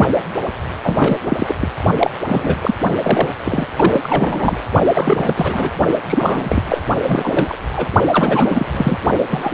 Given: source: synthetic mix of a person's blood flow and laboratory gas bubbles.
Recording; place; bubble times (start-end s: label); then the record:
Doppler ultrasound of blood flow; precordium
0.00-0.07 s: bubbles
0.83-1.17 s: bubbles
1.26-1.55 s: bubbles
1.60-1.68 s: bubbles
2.00-2.10 s: bubbles
2.25-2.56 s: bubbles
2.61-2.74 s: bubbles
3.02-3.28 s: bubbles
3.44-3.67 s: bubbles
3.76-4.00 s: bubbles
4.03-4.57 s: bubbles
4.94-5.70 s: bubbles
6.07-6.83 s: bubbles
7.07-7.58 s: bubbles
7.73-7.91 s: bubbles
8.12-8.67 s: bubbles
8.71-8.97 s: bubbles
9.28-9.54 s: bubbles
From the record:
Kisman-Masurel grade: 343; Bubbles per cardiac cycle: rolling drumbeat, 9 or more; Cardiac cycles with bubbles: 100%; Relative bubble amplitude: loud (0.450 to 0.775); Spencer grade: 3 (all of the cardiac periods contain showers or single bubble signals, but not dominating or overriding the cardiac motion signals); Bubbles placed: only in the low amplitude regions of the cardiac cycle